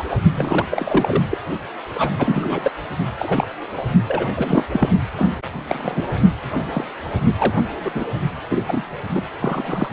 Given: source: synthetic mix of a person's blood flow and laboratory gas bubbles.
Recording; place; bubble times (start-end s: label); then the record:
Doppler ultrasound of blood flow; precordium
0.00-0.04 s: bubbles
0.10-0.17 s: bubbles
0.34-0.66 s: bubbles
0.69-1.23 s: bubbles
1.30-1.38 s: bubbles
1.95-2.10 s: bubbles
2.17-2.71 s: bubbles
3.19-3.47 s: bubbles
3.77-3.82 s: bubbles
4.08-4.63 s: bubbles
4.71-4.89 s: bubbles
5.16-5.38 s: bubbles
5.67-6.06 s: bubbles
6.50-6.68 s: bubbles
6.71-6.84 s: bubbles
7.38-7.71 s: bubbles
7.83-7.90 s: bubbles
7.94-8.04 s: bubbles
8.48-9.01 s: bubbles
9.11-9.21 s: bubbles
9.40-9.89 s: bubbles
From the record:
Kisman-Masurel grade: 242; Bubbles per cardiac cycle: several, 3 to 8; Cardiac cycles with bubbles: 100%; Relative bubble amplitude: moderate (0.250 to 0.450); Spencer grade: 3 (all of the cardiac periods contain showers or single bubble signals, but not dominating or overriding the cardiac motion signals); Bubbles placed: only in the low amplitude regions of the cardiac cycle